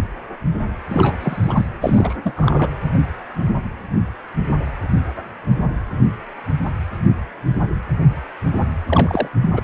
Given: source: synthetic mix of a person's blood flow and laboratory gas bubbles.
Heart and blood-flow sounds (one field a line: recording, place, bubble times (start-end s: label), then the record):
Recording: Doppler ultrasound of blood flow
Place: precordium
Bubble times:
0.90-1.15 s: bubbles
1.21-1.67 s: bubbles
1.82-2.16 s: bubbles
2.23-2.70 s: bubbles
8.87-9.29 s: bubbles
9.42-9.50 s: bubbles
9.53-9.61 s: bubbles
From the record:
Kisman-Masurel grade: 222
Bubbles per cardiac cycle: several, 3 to 8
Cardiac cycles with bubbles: 10 to 50%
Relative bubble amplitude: moderate (0.250 to 0.450)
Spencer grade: 2 (many but less than half of the cardiac periods contain bubble signals, singularly or in groups)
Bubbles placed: anywhere in the cardiac cycle